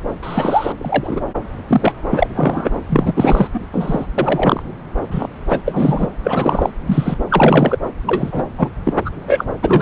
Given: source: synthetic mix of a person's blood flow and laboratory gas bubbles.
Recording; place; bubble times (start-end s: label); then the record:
Doppler ultrasound of blood flow; subclavian vein
0.22-0.72 s: bubbles
0.78-1.21 s: bubbles
1.67-1.93 s: bubbles
2.10-2.27 s: bubbles
2.37-2.70 s: bubbles
2.89-3.48 s: bubbles
3.54-3.60 s: bubbles
3.73-4.08 s: bubbles
4.18-4.63 s: bubbles
5.11-5.27 s: bubbles
5.49-5.61 s: bubbles
5.65-6.07 s: bubbles
6.24-6.72 s: bubbles
6.87-7.17 s: bubbles
7.29-7.79 s: bubbles
8.06-8.43 s: bubbles
8.57-8.68 s: bubbles
8.85-8.93 s: bubbles
9.05-9.10 s: bubbles
9.27-9.44 s: bubbles
9.62-9.82 s: bubbles
From the record:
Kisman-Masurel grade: 243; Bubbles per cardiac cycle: several, 3 to 8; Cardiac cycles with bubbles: 100%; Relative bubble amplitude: loud (0.450 to 0.775); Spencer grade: 3 (all of the cardiac periods contain showers or single bubble signals, but not dominating or overriding the cardiac motion signals); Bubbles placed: anywhere in the cardiac cycle